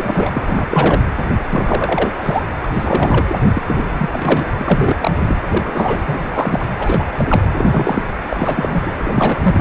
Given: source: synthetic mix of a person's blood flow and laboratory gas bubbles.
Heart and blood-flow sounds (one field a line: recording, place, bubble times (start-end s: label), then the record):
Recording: Doppler ultrasound of blood flow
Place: precordium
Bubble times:
0.00-1.02 s: bubbles
1.50-2.13 s: bubbles
2.19-2.42 s: bubbles
2.62-2.67 s: bubbles
2.73-3.36 s: bubbles
3.54-3.62 s: bubbles
3.67-3.85 s: bubbles
3.98-4.10 s: bubbles
4.12-4.49 s: bubbles
4.61-5.36 s: bubbles
5.54-6.24 s: bubbles
6.33-6.68 s: bubbles
6.79-7.07 s: bubbles
7.18-7.48 s: bubbles
7.57-8.03 s: bubbles
8.29-8.94 s: bubbles
9.04-9.39 s: bubbles
9.42-9.61 s: bubbles
From the record:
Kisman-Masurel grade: 343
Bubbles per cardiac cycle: rolling drumbeat, 9 or more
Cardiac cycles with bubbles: 100%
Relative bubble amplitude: loud (0.450 to 0.775)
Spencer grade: 3 (all of the cardiac periods contain showers or single bubble signals, but not dominating or overriding the cardiac motion signals)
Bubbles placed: anywhere in the cardiac cycle